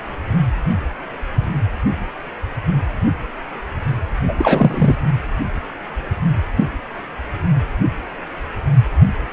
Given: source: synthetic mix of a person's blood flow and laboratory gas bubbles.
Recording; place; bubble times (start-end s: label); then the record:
Doppler ultrasound of blood flow; precordium
4.28-4.34 s: bubbles
4.39-4.95 s: bubbles
From the record:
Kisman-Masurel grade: 213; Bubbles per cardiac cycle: several, 3 to 8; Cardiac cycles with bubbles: 1 to 10%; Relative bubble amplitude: loud (0.450 to 0.775); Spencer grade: 1 (occasional bubble signal discernible with the cardiac motion signal, with majority of cardiac periods free of bubbles); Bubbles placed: anywhere in the cardiac cycle